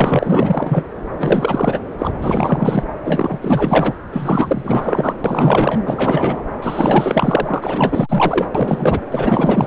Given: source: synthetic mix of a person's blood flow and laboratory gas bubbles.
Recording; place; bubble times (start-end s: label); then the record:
Doppler ultrasound of blood flow; subclavian vein
0.00-0.87 s: bubbles
1.18-1.80 s: bubbles
1.98-2.83 s: bubbles
3.04-3.38 s: bubbles
3.42-3.98 s: bubbles
4.12-5.14 s: bubbles
5.24-5.78 s: bubbles
5.85-6.42 s: bubbles
6.62-8.46 s: bubbles
8.54-9.01 s: bubbles
9.11-9.67 s: bubbles
From the record:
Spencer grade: 4 (maximum detectable bubble signal sounding continuously throughout systole and diastole of every cardiac period, and overriding the amplitude of the normal cardiac signals); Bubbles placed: anywhere in the cardiac cycle